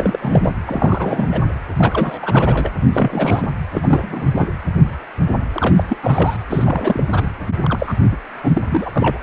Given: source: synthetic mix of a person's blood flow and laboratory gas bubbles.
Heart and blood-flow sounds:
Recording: Doppler ultrasound of blood flow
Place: precordium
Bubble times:
0.00-0.18 s: bubbles
0.21-0.54 s: bubbles
0.66-1.48 s: bubbles
1.76-2.71 s: bubbles
2.93-3.49 s: bubbles
3.73-4.28 s: bubbles
4.36-4.49 s: bubbles
5.54-5.83 s: bubbles
5.88-5.96 s: bubbles
6.03-6.37 s: bubbles
6.49-7.03 s: bubbles
7.12-7.29 s: bubbles
7.63-7.94 s: bubbles
8.11-8.17 s: bubbles
8.43-8.92 s: bubbles
8.96-9.18 s: bubbles
From the record:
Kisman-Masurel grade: 332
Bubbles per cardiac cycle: rolling drumbeat, 9 or more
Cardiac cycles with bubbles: 50 to 99%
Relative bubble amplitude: moderate (0.250 to 0.450)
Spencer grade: 3 (all of the cardiac periods contain showers or single bubble signals, but not dominating or overriding the cardiac motion signals)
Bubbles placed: anywhere in the cardiac cycle

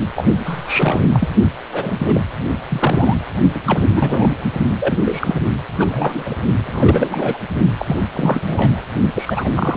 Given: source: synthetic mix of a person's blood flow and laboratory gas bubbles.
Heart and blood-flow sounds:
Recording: Doppler ultrasound of blood flow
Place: precordium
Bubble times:
0.15-0.25 s: bubbles
0.39-1.02 s: bubbles
1.13-1.28 s: bubbles
1.72-2.21 s: bubbles
2.69-3.17 s: bubbles
3.54-3.60 s: bubbles
3.65-3.88 s: bubbles
3.92-4.28 s: bubbles
4.79-4.98 s: bubbles
5.05-5.41 s: bubbles
5.79-6.35 s: bubbles
6.64-7.38 s: bubbles
7.78-8.08 s: bubbles
8.13-8.82 s: bubbles
9.13-9.48 s: bubbles
9.55-9.77 s: bubbles
From the record:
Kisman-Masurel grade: 342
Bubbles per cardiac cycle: rolling drumbeat, 9 or more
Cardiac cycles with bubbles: 100%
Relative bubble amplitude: moderate (0.250 to 0.450)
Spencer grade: 3 (all of the cardiac periods contain showers or single bubble signals, but not dominating or overriding the cardiac motion signals)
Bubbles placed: only in the low amplitude regions of the cardiac cycle

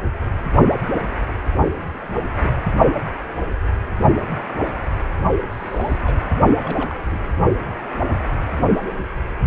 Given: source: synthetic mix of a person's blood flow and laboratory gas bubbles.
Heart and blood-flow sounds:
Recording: Doppler ultrasound of blood flow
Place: precordium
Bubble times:
1.93-2.50 s: bubbles
5.51-6.01 s: bubbles
6.04-6.22 s: bubbles
6.59-6.92 s: bubbles
7.06-7.24 s: bubbles
From the record:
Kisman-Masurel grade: 221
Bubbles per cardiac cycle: several, 3 to 8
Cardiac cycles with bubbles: 10 to 50%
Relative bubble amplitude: barely perceptible (0.100 to 0.250)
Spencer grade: 2 (many but less than half of the cardiac periods contain bubble signals, singularly or in groups)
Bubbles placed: only in the low amplitude regions of the cardiac cycle

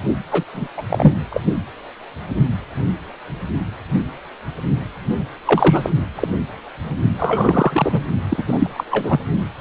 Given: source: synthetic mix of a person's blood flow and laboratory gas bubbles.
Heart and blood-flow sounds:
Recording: Doppler ultrasound of blood flow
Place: precordium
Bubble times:
0.31-0.43 s: bubbles
0.54-0.68 s: bubbles
0.77-0.82 s: bubbles
0.90-1.16 s: bubbles
1.29-1.41 s: bubbles
5.45-5.90 s: bubbles
6.15-6.28 s: bubbles
7.19-8.03 s: bubbles
8.29-8.44 s: bubbles
8.46-8.70 s: bubbles
8.74-8.84 s: bubbles
8.89-9.20 s: bubbles
From the record:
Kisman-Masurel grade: 223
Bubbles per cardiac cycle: several, 3 to 8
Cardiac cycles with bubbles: 10 to 50%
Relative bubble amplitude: loud (0.450 to 0.775)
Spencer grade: 2 (many but less than half of the cardiac periods contain bubble signals, singularly or in groups)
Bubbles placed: only in the low amplitude regions of the cardiac cycle

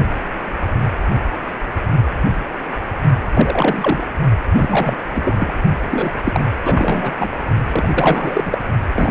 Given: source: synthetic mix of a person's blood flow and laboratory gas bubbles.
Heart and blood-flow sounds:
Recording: Doppler ultrasound of blood flow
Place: precordium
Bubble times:
3.34-4.04 s: bubbles
4.54-4.95 s: bubbles
5.15-5.54 s: bubbles
5.90-6.12 s: bubbles
6.25-6.45 s: bubbles
6.64-7.13 s: bubbles
7.18-7.32 s: bubbles
7.72-8.58 s: bubbles
8.95-9.11 s: bubbles
From the record:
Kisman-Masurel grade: 333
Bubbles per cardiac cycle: rolling drumbeat, 9 or more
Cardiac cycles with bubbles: 50 to 99%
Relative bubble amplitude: loud (0.450 to 0.775)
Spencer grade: 3 (all of the cardiac periods contain showers or single bubble signals, but not dominating or overriding the cardiac motion signals)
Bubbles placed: only in the low amplitude regions of the cardiac cycle

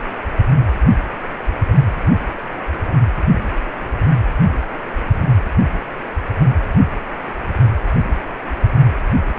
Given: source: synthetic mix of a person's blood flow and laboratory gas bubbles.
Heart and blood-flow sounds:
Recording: Doppler ultrasound of blood flow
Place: precordium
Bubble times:
no bubbles
From the record:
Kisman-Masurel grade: 000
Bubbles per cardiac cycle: 0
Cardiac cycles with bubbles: 0%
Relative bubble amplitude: no bubbles discernible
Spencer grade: 0 (complete lack of bubble signals)

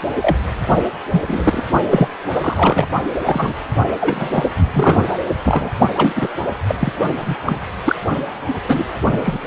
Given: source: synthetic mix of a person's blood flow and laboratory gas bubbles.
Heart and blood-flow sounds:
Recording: Doppler ultrasound of blood flow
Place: precordium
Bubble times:
0.22-0.37 s: bubbles
1.11-1.23 s: bubbles
1.27-1.63 s: bubbles
1.90-2.08 s: bubbles
2.33-2.87 s: bubbles
3.26-3.53 s: bubbles
4.00-4.44 s: bubbles
4.73-5.13 s: bubbles
5.43-5.69 s: bubbles
5.92-6.12 s: bubbles
6.15-6.27 s: bubbles
6.67-6.75 s: bubbles
6.80-6.93 s: bubbles
7.19-7.35 s: bubbles
7.46-7.57 s: bubbles
7.85-7.95 s: bubbles
8.68-8.83 s: bubbles
9.24-9.39 s: bubbles
From the record:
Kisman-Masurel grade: 233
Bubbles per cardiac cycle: several, 3 to 8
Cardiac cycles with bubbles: 50 to 99%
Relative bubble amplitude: loud (0.450 to 0.775)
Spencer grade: 3 (all of the cardiac periods contain showers or single bubble signals, but not dominating or overriding the cardiac motion signals)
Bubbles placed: only in the low amplitude regions of the cardiac cycle

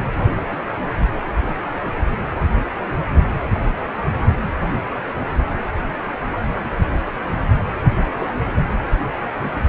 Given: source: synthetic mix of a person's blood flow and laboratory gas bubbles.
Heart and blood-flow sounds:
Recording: Doppler ultrasound of blood flow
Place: precordium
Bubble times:
0.14-0.64 s: bubbles
0.74-1.15 s: bubbles
7.74-7.79 s: bubbles
8.04-8.28 s: bubbles
8.47-8.56 s: bubbles
From the record:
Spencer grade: 2 (many but less than half of the cardiac periods contain bubble signals, singularly or in groups)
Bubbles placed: anywhere in the cardiac cycle

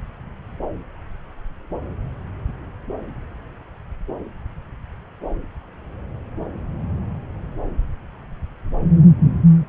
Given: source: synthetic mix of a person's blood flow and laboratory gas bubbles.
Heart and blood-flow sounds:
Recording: Doppler ultrasound of blood flow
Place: subclavian vein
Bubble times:
no bubbles
From the record:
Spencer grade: 0 (complete lack of bubble signals)

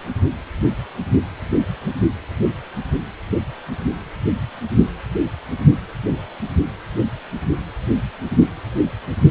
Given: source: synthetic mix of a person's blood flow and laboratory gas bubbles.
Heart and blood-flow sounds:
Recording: Doppler ultrasound of blood flow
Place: precordium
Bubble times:
no bubbles
From the record:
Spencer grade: 0 (complete lack of bubble signals)

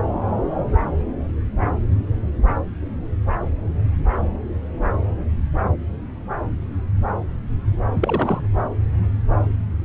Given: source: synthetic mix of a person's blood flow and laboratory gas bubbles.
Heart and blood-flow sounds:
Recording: Doppler ultrasound of blood flow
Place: subclavian vein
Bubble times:
7.94-8.40 s: bubbles
From the record:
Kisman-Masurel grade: 212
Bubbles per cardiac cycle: several, 3 to 8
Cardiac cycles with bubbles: 1 to 10%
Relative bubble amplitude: moderate (0.250 to 0.450)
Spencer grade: 1 (occasional bubble signal discernible with the cardiac motion signal, with majority of cardiac periods free of bubbles)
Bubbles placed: anywhere in the cardiac cycle

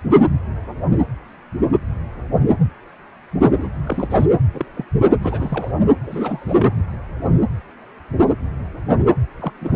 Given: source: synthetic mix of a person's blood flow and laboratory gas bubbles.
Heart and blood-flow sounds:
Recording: Doppler ultrasound of blood flow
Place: precordium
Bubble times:
3.51-3.69 s: bubbles
3.84-4.26 s: bubbles
4.54-4.66 s: bubbles
4.75-4.85 s: bubbles
5.22-5.72 s: bubbles
6.01-6.76 s: bubbles
9.39-9.52 s: bubbles
9.61-9.76 s: bubbles
From the record:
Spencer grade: 2 (many but less than half of the cardiac periods contain bubble signals, singularly or in groups)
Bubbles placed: anywhere in the cardiac cycle

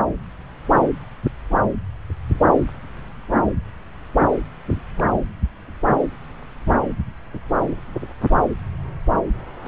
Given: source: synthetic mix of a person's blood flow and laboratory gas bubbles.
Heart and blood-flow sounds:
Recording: Doppler ultrasound of blood flow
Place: subclavian vein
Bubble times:
4.97-5.04 s: bubbles
From the record:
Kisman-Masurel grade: 111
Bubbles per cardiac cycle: 1 to 2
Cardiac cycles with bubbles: 1 to 10%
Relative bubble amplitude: barely perceptible (0.100 to 0.250)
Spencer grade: 1 (occasional bubble signal discernible with the cardiac motion signal, with majority of cardiac periods free of bubbles)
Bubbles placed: anywhere in the cardiac cycle

